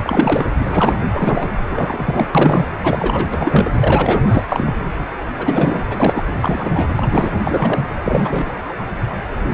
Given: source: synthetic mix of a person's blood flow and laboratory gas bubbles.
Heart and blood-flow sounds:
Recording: Doppler ultrasound of blood flow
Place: precordium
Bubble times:
0.03-0.46 s: bubbles
0.59-0.98 s: bubbles
1.12-1.49 s: bubbles
1.69-2.27 s: bubbles
2.34-2.65 s: bubbles
2.83-3.26 s: bubbles
3.29-3.70 s: bubbles
3.80-4.43 s: bubbles
4.48-4.71 s: bubbles
5.38-5.83 s: bubbles
5.91-6.23 s: bubbles
6.42-6.88 s: bubbles
6.97-7.38 s: bubbles
7.47-7.84 s: bubbles
8.04-8.53 s: bubbles
9.51-9.54 s: bubbles
From the record:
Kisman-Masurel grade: 332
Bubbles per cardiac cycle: rolling drumbeat, 9 or more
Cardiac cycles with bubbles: 50 to 99%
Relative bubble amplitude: moderate (0.250 to 0.450)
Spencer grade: 3 (all of the cardiac periods contain showers or single bubble signals, but not dominating or overriding the cardiac motion signals)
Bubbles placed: anywhere in the cardiac cycle

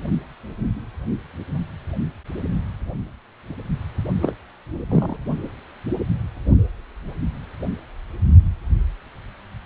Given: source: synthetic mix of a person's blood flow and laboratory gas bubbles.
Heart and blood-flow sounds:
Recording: Doppler ultrasound of blood flow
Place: precordium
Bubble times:
4.21-4.34 s: bubbles
4.90-5.17 s: bubbles
From the record:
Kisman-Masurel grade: 113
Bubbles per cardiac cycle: 1 to 2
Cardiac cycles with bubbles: 1 to 10%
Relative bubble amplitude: loud (0.450 to 0.775)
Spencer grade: 1 (occasional bubble signal discernible with the cardiac motion signal, with majority of cardiac periods free of bubbles)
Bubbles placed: only in the low amplitude regions of the cardiac cycle

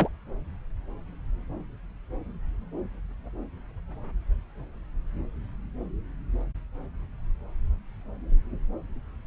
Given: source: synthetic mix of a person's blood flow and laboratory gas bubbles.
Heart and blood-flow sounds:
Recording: Doppler ultrasound of blood flow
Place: subclavian vein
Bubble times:
0.00-0.08 s: bubbles
From the record:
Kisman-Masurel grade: 122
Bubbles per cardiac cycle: 1 to 2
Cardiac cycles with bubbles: 10 to 50%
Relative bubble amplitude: moderate (0.250 to 0.450)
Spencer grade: 2 (many but less than half of the cardiac periods contain bubble signals, singularly or in groups)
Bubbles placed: anywhere in the cardiac cycle

